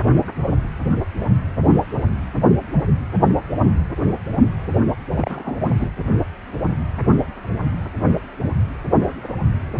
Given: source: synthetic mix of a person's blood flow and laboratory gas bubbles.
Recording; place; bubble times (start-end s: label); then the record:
Doppler ultrasound of blood flow; precordium
5.16-5.62 s: bubbles
5.78-5.88 s: bubbles
From the record:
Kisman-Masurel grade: 212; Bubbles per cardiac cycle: several, 3 to 8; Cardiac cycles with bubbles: 1 to 10%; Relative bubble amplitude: moderate (0.250 to 0.450); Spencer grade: 1 (occasional bubble signal discernible with the cardiac motion signal, with majority of cardiac periods free of bubbles); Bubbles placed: anywhere in the cardiac cycle